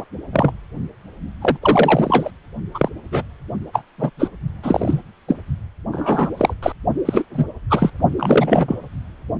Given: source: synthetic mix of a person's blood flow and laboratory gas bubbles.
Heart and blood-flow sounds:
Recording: Doppler ultrasound of blood flow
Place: precordium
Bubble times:
0.00-0.05 s: bubbles
0.33-0.52 s: bubbles
1.41-1.57 s: bubbles
1.62-2.31 s: bubbles
2.74-2.89 s: bubbles
3.11-3.24 s: bubbles
3.73-3.83 s: bubbles
3.98-4.10 s: bubbles
4.19-4.29 s: bubbles
4.62-5.01 s: bubbles
5.27-5.38 s: bubbles
5.92-6.30 s: bubbles
6.37-6.54 s: bubbles
6.62-6.72 s: bubbles
7.05-7.24 s: bubbles
7.33-7.45 s: bubbles
7.70-7.91 s: bubbles
8.19-8.78 s: bubbles
From the record:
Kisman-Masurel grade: 243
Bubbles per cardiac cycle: several, 3 to 8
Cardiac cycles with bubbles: 100%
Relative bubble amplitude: loud (0.450 to 0.775)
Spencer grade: 3 (all of the cardiac periods contain showers or single bubble signals, but not dominating or overriding the cardiac motion signals)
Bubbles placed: only in the low amplitude regions of the cardiac cycle

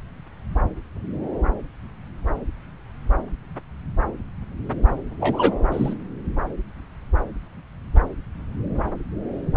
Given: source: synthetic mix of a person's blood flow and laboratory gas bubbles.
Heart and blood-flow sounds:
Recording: Doppler ultrasound of blood flow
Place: subclavian vein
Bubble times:
5.20-5.53 s: bubbles
5.71-5.95 s: bubbles
From the record:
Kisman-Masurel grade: 113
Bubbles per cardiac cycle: 1 to 2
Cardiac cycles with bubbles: 1 to 10%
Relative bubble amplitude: loud (0.450 to 0.775)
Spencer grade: 1 (occasional bubble signal discernible with the cardiac motion signal, with majority of cardiac periods free of bubbles)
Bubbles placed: anywhere in the cardiac cycle

